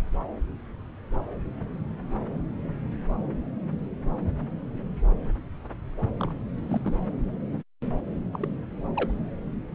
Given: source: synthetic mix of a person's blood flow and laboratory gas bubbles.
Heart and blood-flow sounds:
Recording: Doppler ultrasound of blood flow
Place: subclavian vein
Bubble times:
6.19-6.32 s: bubbles
6.69-6.82 s: bubbles
6.85-6.92 s: bubbles
6.95-7.00 s: bubbles
8.33-8.38 s: bubbles
8.43-8.47 s: bubbles
8.96-9.12 s: bubbles
From the record:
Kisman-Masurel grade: 221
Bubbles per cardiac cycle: several, 3 to 8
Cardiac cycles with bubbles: 10 to 50%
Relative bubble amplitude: barely perceptible (0.100 to 0.250)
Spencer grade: 2 (many but less than half of the cardiac periods contain bubble signals, singularly or in groups)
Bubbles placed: anywhere in the cardiac cycle

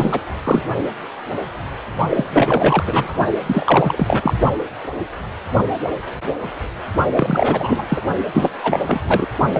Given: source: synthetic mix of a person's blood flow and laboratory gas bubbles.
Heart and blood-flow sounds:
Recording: Doppler ultrasound of blood flow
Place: precordium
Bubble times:
0.00-0.21 s: bubbles
0.44-0.63 s: bubbles
2.09-3.13 s: bubbles
3.46-4.33 s: bubbles
7.16-7.86 s: bubbles
7.89-8.01 s: bubbles
8.33-8.49 s: bubbles
8.63-9.27 s: bubbles
9.52-9.60 s: bubbles
From the record:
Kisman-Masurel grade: 333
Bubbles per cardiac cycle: rolling drumbeat, 9 or more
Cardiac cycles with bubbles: 50 to 99%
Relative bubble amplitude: loud (0.450 to 0.775)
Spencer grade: 3 (all of the cardiac periods contain showers or single bubble signals, but not dominating or overriding the cardiac motion signals)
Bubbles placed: only in the low amplitude regions of the cardiac cycle

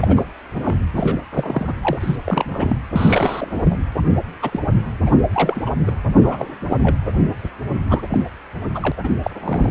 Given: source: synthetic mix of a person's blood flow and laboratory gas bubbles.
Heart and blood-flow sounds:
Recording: Doppler ultrasound of blood flow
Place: precordium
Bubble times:
0.00-0.24 s: bubbles
0.54-0.83 s: bubbles
0.95-1.20 s: bubbles
1.34-1.73 s: bubbles
1.81-2.16 s: bubbles
2.25-2.77 s: bubbles
2.92-3.78 s: bubbles
3.96-4.02 s: bubbles
4.42-4.60 s: bubbles
5.06-5.10 s: bubbles
5.33-5.62 s: bubbles
5.66-5.70 s: bubbles
5.87-5.91 s: bubbles
6.23-6.57 s: bubbles
6.70-6.76 s: bubbles
6.83-6.96 s: bubbles
7.88-8.01 s: bubbles
8.10-8.24 s: bubbles
8.74-8.92 s: bubbles
9.04-9.10 s: bubbles
9.23-9.31 s: bubbles
9.40-9.71 s: bubbles
From the record:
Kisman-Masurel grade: 242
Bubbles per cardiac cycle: several, 3 to 8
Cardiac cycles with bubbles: 100%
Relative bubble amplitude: moderate (0.250 to 0.450)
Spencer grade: 3 (all of the cardiac periods contain showers or single bubble signals, but not dominating or overriding the cardiac motion signals)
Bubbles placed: anywhere in the cardiac cycle

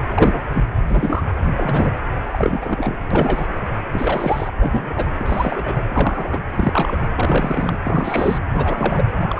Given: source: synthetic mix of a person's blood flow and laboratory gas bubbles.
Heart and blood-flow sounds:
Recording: Doppler ultrasound of blood flow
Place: precordium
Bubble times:
0.14-0.43 s: bubbles
0.53-0.66 s: bubbles
0.85-1.24 s: bubbles
1.56-1.92 s: bubbles
2.26-2.98 s: bubbles
3.10-3.46 s: bubbles
3.93-4.50 s: bubbles
4.58-5.05 s: bubbles
5.19-5.82 s: bubbles
5.88-6.40 s: bubbles
6.55-6.97 s: bubbles
7.15-7.77 s: bubbles
7.83-8.38 s: bubbles
8.53-9.04 s: bubbles
9.21-9.26 s: bubbles
9.29-9.40 s: bubbles
From the record:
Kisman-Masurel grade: 242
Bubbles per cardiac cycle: several, 3 to 8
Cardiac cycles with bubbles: 100%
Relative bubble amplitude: moderate (0.250 to 0.450)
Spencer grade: 3 (all of the cardiac periods contain showers or single bubble signals, but not dominating or overriding the cardiac motion signals)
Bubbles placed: anywhere in the cardiac cycle

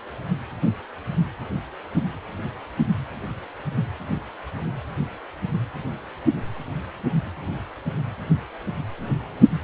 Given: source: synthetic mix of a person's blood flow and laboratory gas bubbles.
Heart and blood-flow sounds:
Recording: Doppler ultrasound of blood flow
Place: precordium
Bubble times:
no bubbles
From the record:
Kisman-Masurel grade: 000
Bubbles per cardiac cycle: 0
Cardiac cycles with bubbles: 0%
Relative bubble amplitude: no bubbles discernible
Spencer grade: 0 (complete lack of bubble signals)

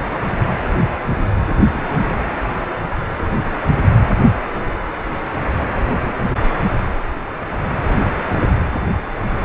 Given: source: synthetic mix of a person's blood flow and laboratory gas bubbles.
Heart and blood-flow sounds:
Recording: Doppler ultrasound of blood flow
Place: precordium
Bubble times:
1.67-2.28 s: bubbles
5.58-5.66 s: bubbles
5.76-6.17 s: bubbles
6.38-6.50 s: bubbles
7.83-8.13 s: bubbles
8.15-8.49 s: bubbles
From the record:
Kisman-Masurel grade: 221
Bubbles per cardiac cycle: several, 3 to 8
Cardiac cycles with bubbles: 10 to 50%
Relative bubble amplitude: barely perceptible (0.100 to 0.250)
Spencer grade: 2 (many but less than half of the cardiac periods contain bubble signals, singularly or in groups)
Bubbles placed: anywhere in the cardiac cycle

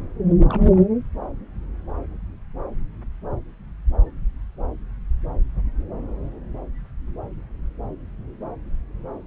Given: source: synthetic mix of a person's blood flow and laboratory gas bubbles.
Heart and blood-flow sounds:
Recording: Doppler ultrasound of blood flow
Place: subclavian vein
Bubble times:
0.30-0.33 s: bubbles
0.41-0.86 s: bubbles
From the record:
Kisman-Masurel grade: 211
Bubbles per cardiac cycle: several, 3 to 8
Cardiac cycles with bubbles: 1 to 10%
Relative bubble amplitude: barely perceptible (0.100 to 0.250)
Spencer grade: 1 (occasional bubble signal discernible with the cardiac motion signal, with majority of cardiac periods free of bubbles)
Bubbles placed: anywhere in the cardiac cycle

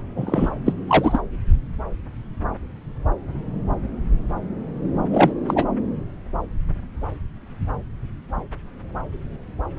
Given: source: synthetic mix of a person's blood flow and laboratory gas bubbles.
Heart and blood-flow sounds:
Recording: Doppler ultrasound of blood flow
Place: subclavian vein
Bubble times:
0.16-0.52 s: bubbles
0.65-0.73 s: bubbles
0.87-1.20 s: bubbles
5.11-5.32 s: bubbles
5.47-5.65 s: bubbles
From the record:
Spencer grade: 2 (many but less than half of the cardiac periods contain bubble signals, singularly or in groups)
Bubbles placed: anywhere in the cardiac cycle

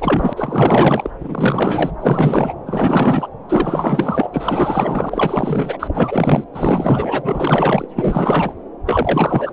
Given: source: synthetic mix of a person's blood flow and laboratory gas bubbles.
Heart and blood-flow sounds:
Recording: Doppler ultrasound of blood flow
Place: subclavian vein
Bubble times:
0.00-0.33 s: bubbles
0.36-1.10 s: bubbles
1.20-1.92 s: bubbles
1.99-2.54 s: bubbles
2.66-3.29 s: bubbles
3.48-4.30 s: bubbles
4.33-5.77 s: bubbles
5.79-6.44 s: bubbles
6.53-7.87 s: bubbles
7.96-8.53 s: bubbles
8.86-9.53 s: bubbles
From the record:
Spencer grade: 4 (maximum detectable bubble signal sounding continuously throughout systole and diastole of every cardiac period, and overriding the amplitude of the normal cardiac signals)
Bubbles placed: anywhere in the cardiac cycle

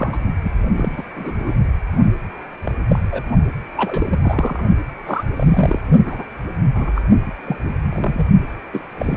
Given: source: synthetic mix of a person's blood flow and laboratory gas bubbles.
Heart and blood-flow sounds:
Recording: Doppler ultrasound of blood flow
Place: precordium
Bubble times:
0.00-0.18 s: bubbles
0.44-0.51 s: bubbles
0.77-1.03 s: bubbles
1.16-1.32 s: bubbles
1.39-1.58 s: bubbles
2.63-2.75 s: bubbles
2.88-2.99 s: bubbles
3.11-3.23 s: bubbles
3.77-4.19 s: bubbles
4.23-4.63 s: bubbles
5.06-5.24 s: bubbles
5.36-5.79 s: bubbles
6.05-6.24 s: bubbles
6.75-6.92 s: bubbles
6.95-7.02 s: bubbles
7.25-7.32 s: bubbles
7.45-7.56 s: bubbles
7.63-7.72 s: bubbles
7.89-8.27 s: bubbles
8.72-8.82 s: bubbles
8.99-9.17 s: bubbles
From the record:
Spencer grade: 3 (all of the cardiac periods contain showers or single bubble signals, but not dominating or overriding the cardiac motion signals)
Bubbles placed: only in the low amplitude regions of the cardiac cycle

